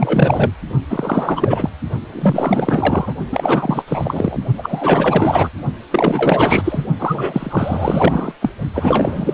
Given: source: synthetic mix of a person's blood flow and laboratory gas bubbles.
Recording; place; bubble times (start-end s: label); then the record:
Doppler ultrasound of blood flow; precordium
0.00-0.52 s: bubbles
0.89-1.70 s: bubbles
2.12-3.14 s: bubbles
3.32-3.83 s: bubbles
3.88-4.38 s: bubbles
4.58-5.50 s: bubbles
5.91-6.84 s: bubbles
6.99-8.33 s: bubbles
8.42-8.51 s: bubbles
8.74-9.34 s: bubbles
From the record:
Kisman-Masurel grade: 444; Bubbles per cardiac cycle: continuous sound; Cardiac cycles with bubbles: 100%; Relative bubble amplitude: maximal (0.775 to 0.999); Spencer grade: 4 (maximum detectable bubble signal sounding continuously throughout systole and diastole of every cardiac period, and overriding the amplitude of the normal cardiac signals); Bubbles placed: only in the low amplitude regions of the cardiac cycle